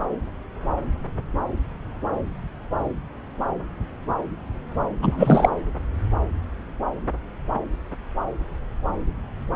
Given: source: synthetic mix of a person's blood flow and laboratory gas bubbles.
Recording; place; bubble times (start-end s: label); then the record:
Doppler ultrasound of blood flow; subclavian vein
5.01-5.49 s: bubbles
From the record:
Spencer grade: 1 (occasional bubble signal discernible with the cardiac motion signal, with majority of cardiac periods free of bubbles); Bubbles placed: anywhere in the cardiac cycle